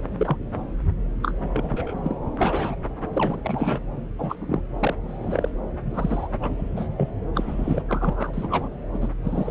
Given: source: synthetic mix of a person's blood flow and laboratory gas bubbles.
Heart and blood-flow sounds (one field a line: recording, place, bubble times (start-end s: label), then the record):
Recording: Doppler ultrasound of blood flow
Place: subclavian vein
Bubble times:
0.17-0.37 s: bubbles
1.22-1.31 s: bubbles
1.53-1.93 s: bubbles
2.04-2.16 s: bubbles
2.37-2.76 s: bubbles
3.13-3.40 s: bubbles
3.43-3.80 s: bubbles
4.18-4.35 s: bubbles
4.40-4.63 s: bubbles
4.79-4.94 s: bubbles
5.07-5.50 s: bubbles
5.85-6.27 s: bubbles
6.40-6.54 s: bubbles
6.57-6.88 s: bubbles
6.97-7.09 s: bubbles
7.34-7.82 s: bubbles
7.88-8.68 s: bubbles
8.94-9.08 s: bubbles
9.24-9.51 s: bubbles
From the record:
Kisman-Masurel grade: 242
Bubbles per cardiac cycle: several, 3 to 8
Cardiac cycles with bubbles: 100%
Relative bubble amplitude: moderate (0.250 to 0.450)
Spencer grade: 3 (all of the cardiac periods contain showers or single bubble signals, but not dominating or overriding the cardiac motion signals)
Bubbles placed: anywhere in the cardiac cycle